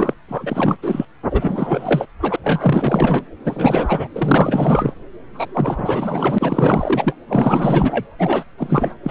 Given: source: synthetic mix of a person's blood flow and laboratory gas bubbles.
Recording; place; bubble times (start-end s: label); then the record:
Doppler ultrasound of blood flow; subclavian vein
0.00-0.14 s: bubbles
0.28-0.77 s: bubbles
0.82-1.05 s: bubbles
1.30-2.05 s: bubbles
2.21-2.36 s: bubbles
2.43-3.25 s: bubbles
3.44-4.07 s: bubbles
4.15-4.95 s: bubbles
5.33-7.16 s: bubbles
7.28-8.06 s: bubbles
8.18-8.44 s: bubbles
8.57-8.94 s: bubbles
9.03-9.11 s: bubbles
From the record:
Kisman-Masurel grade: 444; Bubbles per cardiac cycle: continuous sound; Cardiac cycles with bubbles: 100%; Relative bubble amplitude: maximal (0.775 to 0.999); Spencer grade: 4 (maximum detectable bubble signal sounding continuously throughout systole and diastole of every cardiac period, and overriding the amplitude of the normal cardiac signals); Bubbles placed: anywhere in the cardiac cycle